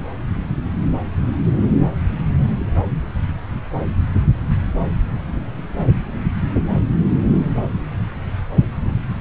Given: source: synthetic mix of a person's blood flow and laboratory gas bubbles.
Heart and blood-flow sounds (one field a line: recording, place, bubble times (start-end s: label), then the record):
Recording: Doppler ultrasound of blood flow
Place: subclavian vein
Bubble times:
no bubbles
From the record:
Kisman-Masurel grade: 000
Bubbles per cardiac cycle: 0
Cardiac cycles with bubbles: 0%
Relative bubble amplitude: no bubbles discernible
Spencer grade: 0 (complete lack of bubble signals)